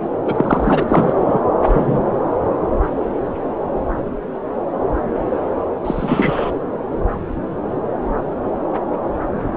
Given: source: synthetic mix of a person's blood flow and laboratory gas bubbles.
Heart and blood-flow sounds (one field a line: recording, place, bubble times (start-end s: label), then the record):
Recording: Doppler ultrasound of blood flow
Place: subclavian vein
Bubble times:
0.25-0.83 s: bubbles
0.88-1.41 s: bubbles
1.62-2.02 s: bubbles
5.84-6.51 s: bubbles
From the record:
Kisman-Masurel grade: 223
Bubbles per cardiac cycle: several, 3 to 8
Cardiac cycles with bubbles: 10 to 50%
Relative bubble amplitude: loud (0.450 to 0.775)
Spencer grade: 2 (many but less than half of the cardiac periods contain bubble signals, singularly or in groups)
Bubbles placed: anywhere in the cardiac cycle